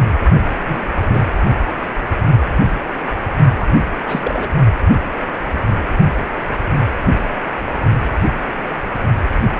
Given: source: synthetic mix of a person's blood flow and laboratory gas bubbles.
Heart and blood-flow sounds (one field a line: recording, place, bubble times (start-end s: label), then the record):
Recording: Doppler ultrasound of blood flow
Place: precordium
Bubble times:
0.66-0.87 s: bubbles
1.01-1.30 s: bubbles
3.60-3.68 s: bubbles
4.06-4.49 s: bubbles
From the record:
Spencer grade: 2 (many but less than half of the cardiac periods contain bubble signals, singularly or in groups)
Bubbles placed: only in the low amplitude regions of the cardiac cycle